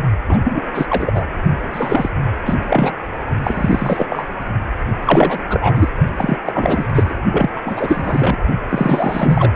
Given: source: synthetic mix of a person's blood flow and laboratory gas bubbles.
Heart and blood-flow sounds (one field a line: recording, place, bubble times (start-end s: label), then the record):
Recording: Doppler ultrasound of blood flow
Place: precordium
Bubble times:
0.28-0.38 s: bubbles
0.43-0.61 s: bubbles
0.74-1.26 s: bubbles
1.73-2.10 s: bubbles
2.46-2.55 s: bubbles
2.67-2.93 s: bubbles
3.43-4.06 s: bubbles
4.09-4.25 s: bubbles
5.06-5.43 s: bubbles
5.49-5.89 s: bubbles
6.17-6.37 s: bubbles
6.45-7.16 s: bubbles
7.31-7.50 s: bubbles
7.55-7.60 s: bubbles
7.65-8.37 s: bubbles
8.69-9.52 s: bubbles
From the record:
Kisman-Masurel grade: 343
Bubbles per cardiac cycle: rolling drumbeat, 9 or more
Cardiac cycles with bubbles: 100%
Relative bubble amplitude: loud (0.450 to 0.775)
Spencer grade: 3 (all of the cardiac periods contain showers or single bubble signals, but not dominating or overriding the cardiac motion signals)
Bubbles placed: only in the low amplitude regions of the cardiac cycle